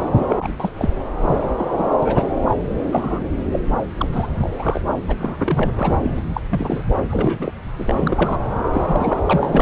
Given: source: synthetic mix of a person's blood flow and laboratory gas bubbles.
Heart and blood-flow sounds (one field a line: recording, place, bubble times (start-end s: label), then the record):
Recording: Doppler ultrasound of blood flow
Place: subclavian vein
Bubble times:
0.15-0.47 s: bubbles
0.59-0.71 s: bubbles
0.78-0.90 s: bubbles
1.22-1.38 s: bubbles
1.57-1.71 s: bubbles
1.77-1.88 s: bubbles
2.02-2.32 s: bubbles
2.48-2.57 s: bubbles
2.92-3.25 s: bubbles
3.52-3.59 s: bubbles
3.94-4.27 s: bubbles
4.37-4.81 s: bubbles
5.08-5.16 s: bubbles
5.20-5.71 s: bubbles
5.76-6.41 s: bubbles
6.50-6.83 s: bubbles
7.10-7.53 s: bubbles
7.78-8.39 s: bubbles
8.72-9.20 s: bubbles
9.29-9.62 s: bubbles
From the record:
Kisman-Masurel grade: 242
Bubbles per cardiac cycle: several, 3 to 8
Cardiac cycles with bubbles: 100%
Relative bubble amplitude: moderate (0.250 to 0.450)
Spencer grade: 3 (all of the cardiac periods contain showers or single bubble signals, but not dominating or overriding the cardiac motion signals)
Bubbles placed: anywhere in the cardiac cycle